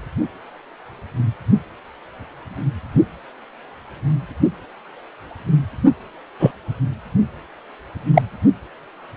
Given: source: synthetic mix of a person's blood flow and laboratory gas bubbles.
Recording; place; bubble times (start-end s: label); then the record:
Doppler ultrasound of blood flow; precordium
6.39-6.51 s: bubbles
8.13-8.22 s: bubbles
From the record:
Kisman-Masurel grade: 123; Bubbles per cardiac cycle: 1 to 2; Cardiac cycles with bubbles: 10 to 50%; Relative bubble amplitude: loud (0.450 to 0.775); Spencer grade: 2 (many but less than half of the cardiac periods contain bubble signals, singularly or in groups); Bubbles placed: only in the low amplitude regions of the cardiac cycle